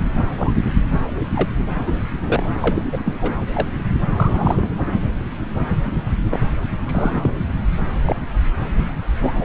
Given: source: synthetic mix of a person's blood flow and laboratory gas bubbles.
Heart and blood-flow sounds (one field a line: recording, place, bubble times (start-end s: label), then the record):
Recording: Doppler ultrasound of blood flow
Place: subclavian vein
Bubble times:
0.17-0.24 s: bubbles
0.38-0.54 s: bubbles
1.35-1.48 s: bubbles
1.85-1.92 s: bubbles
2.27-2.46 s: bubbles
2.61-2.83 s: bubbles
2.92-3.02 s: bubbles
3.05-3.13 s: bubbles
3.21-3.33 s: bubbles
3.54-3.68 s: bubbles
4.06-4.73 s: bubbles
6.31-6.40 s: bubbles
6.86-7.29 s: bubbles
8.07-8.16 s: bubbles
9.21-9.30 s: bubbles
9.39-9.45 s: bubbles
From the record:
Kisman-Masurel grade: 232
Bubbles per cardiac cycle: several, 3 to 8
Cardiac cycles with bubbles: 50 to 99%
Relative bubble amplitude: moderate (0.250 to 0.450)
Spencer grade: 3 (all of the cardiac periods contain showers or single bubble signals, but not dominating or overriding the cardiac motion signals)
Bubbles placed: anywhere in the cardiac cycle